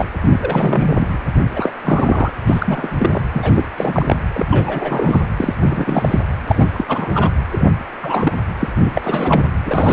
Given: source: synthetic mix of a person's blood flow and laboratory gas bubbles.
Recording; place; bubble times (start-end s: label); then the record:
Doppler ultrasound of blood flow; precordium
0.00-0.06 s: bubbles
0.32-1.18 s: bubbles
1.55-1.70 s: bubbles
1.84-2.35 s: bubbles
2.46-2.90 s: bubbles
2.99-3.22 s: bubbles
3.33-3.65 s: bubbles
3.77-4.19 s: bubbles
4.34-4.46 s: bubbles
4.51-5.25 s: bubbles
5.37-5.54 s: bubbles
5.60-6.20 s: bubbles
6.48-6.67 s: bubbles
6.73-6.84 s: bubbles
6.88-7.29 s: bubbles
7.52-7.71 s: bubbles
8.02-8.32 s: bubbles
8.59-8.68 s: bubbles
8.78-9.01 s: bubbles
9.04-9.49 s: bubbles
9.65-9.93 s: bubbles
From the record:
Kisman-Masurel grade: 343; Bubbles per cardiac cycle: rolling drumbeat, 9 or more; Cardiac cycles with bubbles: 100%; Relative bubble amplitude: loud (0.450 to 0.775); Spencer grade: 3 (all of the cardiac periods contain showers or single bubble signals, but not dominating or overriding the cardiac motion signals); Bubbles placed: anywhere in the cardiac cycle